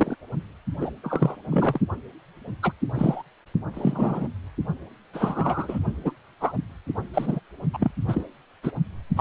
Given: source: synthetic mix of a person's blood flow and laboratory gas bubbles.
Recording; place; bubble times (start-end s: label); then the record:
Doppler ultrasound of blood flow; precordium
0.00-0.16 s: bubbles
0.80-0.91 s: bubbles
1.03-1.36 s: bubbles
1.50-1.81 s: bubbles
2.62-2.73 s: bubbles
2.94-3.23 s: bubbles
3.73-4.28 s: bubbles
5.13-5.79 s: bubbles
6.05-6.12 s: bubbles
6.40-6.53 s: bubbles
7.14-7.40 s: bubbles
7.73-7.91 s: bubbles
8.08-8.27 s: bubbles
8.62-8.71 s: bubbles
9.16-9.21 s: bubbles
From the record:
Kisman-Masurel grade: 243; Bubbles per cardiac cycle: several, 3 to 8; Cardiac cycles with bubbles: 100%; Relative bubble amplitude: loud (0.450 to 0.775); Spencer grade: 3 (all of the cardiac periods contain showers or single bubble signals, but not dominating or overriding the cardiac motion signals); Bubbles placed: only in the low amplitude regions of the cardiac cycle